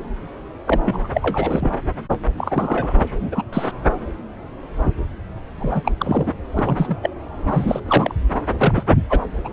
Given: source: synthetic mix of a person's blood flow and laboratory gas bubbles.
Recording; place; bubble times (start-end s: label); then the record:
Doppler ultrasound of blood flow; subclavian vein
0.67-1.08 s: bubbles
1.14-1.72 s: bubbles
2.37-2.96 s: bubbles
3.06-3.44 s: bubbles
3.52-3.71 s: bubbles
5.59-5.81 s: bubbles
5.84-5.92 s: bubbles
5.97-6.33 s: bubbles
6.56-6.97 s: bubbles
7.02-7.10 s: bubbles
7.50-7.81 s: bubbles
7.85-8.15 s: bubbles
8.61-8.83 s: bubbles
9.10-9.20 s: bubbles
9.45-9.49 s: bubbles
From the record:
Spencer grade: 3 (all of the cardiac periods contain showers or single bubble signals, but not dominating or overriding the cardiac motion signals); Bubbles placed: anywhere in the cardiac cycle